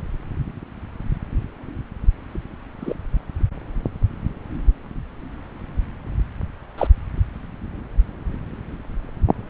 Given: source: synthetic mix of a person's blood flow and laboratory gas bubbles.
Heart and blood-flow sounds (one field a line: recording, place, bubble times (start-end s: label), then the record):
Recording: Doppler ultrasound of blood flow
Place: subclavian vein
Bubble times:
2.80-2.94 s: bubbles
6.77-6.87 s: bubbles
From the record:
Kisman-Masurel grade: 122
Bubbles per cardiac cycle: 1 to 2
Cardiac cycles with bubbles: 10 to 50%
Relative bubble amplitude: moderate (0.250 to 0.450)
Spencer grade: 2 (many but less than half of the cardiac periods contain bubble signals, singularly or in groups)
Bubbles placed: anywhere in the cardiac cycle